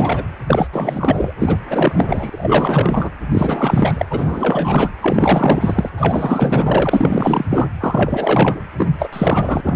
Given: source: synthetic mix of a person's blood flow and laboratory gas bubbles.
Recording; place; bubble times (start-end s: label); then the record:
Doppler ultrasound of blood flow; precordium
0.00-0.23 s: bubbles
0.46-0.69 s: bubbles
0.72-1.33 s: bubbles
1.39-1.59 s: bubbles
1.70-3.09 s: bubbles
3.31-4.06 s: bubbles
4.10-4.90 s: bubbles
5.02-5.90 s: bubbles
5.98-7.46 s: bubbles
7.50-7.70 s: bubbles
7.80-8.60 s: bubbles
8.78-8.93 s: bubbles
8.99-9.09 s: bubbles
9.12-9.61 s: bubbles
9.64-9.76 s: bubbles
From the record:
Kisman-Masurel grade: 444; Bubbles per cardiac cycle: continuous sound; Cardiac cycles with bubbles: 100%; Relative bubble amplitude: maximal (0.775 to 0.999); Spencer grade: 4 (maximum detectable bubble signal sounding continuously throughout systole and diastole of every cardiac period, and overriding the amplitude of the normal cardiac signals); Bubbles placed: anywhere in the cardiac cycle